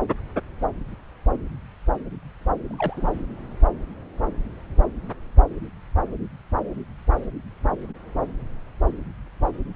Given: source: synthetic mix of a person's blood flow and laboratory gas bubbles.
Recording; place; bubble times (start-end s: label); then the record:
Doppler ultrasound of blood flow; subclavian vein
2.68-3.23 s: bubbles
From the record:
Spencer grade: 1 (occasional bubble signal discernible with the cardiac motion signal, with majority of cardiac periods free of bubbles); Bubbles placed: anywhere in the cardiac cycle